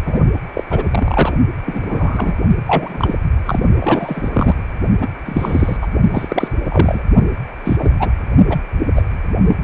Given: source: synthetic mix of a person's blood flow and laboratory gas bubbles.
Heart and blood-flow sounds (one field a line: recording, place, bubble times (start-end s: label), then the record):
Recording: Doppler ultrasound of blood flow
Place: precordium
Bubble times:
0.00-0.03 s: bubbles
0.06-0.20 s: bubbles
0.54-0.64 s: bubbles
0.70-0.87 s: bubbles
0.91-1.33 s: bubbles
1.65-2.35 s: bubbles
2.67-3.15 s: bubbles
3.46-3.60 s: bubbles
3.81-4.30 s: bubbles
4.32-4.54 s: bubbles
5.00-5.07 s: bubbles
5.25-5.76 s: bubbles
5.81-5.88 s: bubbles
6.11-6.52 s: bubbles
6.63-7.03 s: bubbles
7.64-7.94 s: bubbles
7.99-8.10 s: bubbles
8.49-8.58 s: bubbles
8.96-9.03 s: bubbles
9.47-9.55 s: bubbles
From the record:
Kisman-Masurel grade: 243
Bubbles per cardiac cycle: several, 3 to 8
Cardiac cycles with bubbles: 100%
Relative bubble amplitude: loud (0.450 to 0.775)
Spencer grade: 3 (all of the cardiac periods contain showers or single bubble signals, but not dominating or overriding the cardiac motion signals)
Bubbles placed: only in the low amplitude regions of the cardiac cycle